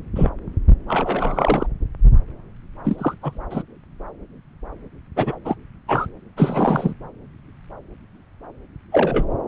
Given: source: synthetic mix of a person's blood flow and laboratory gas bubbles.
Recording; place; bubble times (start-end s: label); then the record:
Doppler ultrasound of blood flow; subclavian vein
0.15-0.30 s: bubbles
0.88-1.67 s: bubbles
2.84-3.15 s: bubbles
3.21-3.39 s: bubbles
3.50-3.62 s: bubbles
5.16-5.35 s: bubbles
5.45-5.56 s: bubbles
5.87-6.06 s: bubbles
6.37-6.94 s: bubbles
8.91-9.25 s: bubbles
From the record:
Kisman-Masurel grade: 233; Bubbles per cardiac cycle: several, 3 to 8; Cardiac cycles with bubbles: 50 to 99%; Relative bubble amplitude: loud (0.450 to 0.775); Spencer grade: 3 (all of the cardiac periods contain showers or single bubble signals, but not dominating or overriding the cardiac motion signals); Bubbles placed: anywhere in the cardiac cycle